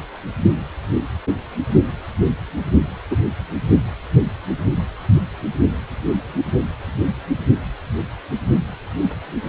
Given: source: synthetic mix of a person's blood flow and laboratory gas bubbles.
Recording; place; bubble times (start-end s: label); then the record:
Doppler ultrasound of blood flow; precordium
3.10-3.17 s: bubbles
From the record:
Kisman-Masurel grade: 113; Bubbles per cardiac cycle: 1 to 2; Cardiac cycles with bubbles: 1 to 10%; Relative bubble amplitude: loud (0.450 to 0.775); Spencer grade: 1 (occasional bubble signal discernible with the cardiac motion signal, with majority of cardiac periods free of bubbles); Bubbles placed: only in the low amplitude regions of the cardiac cycle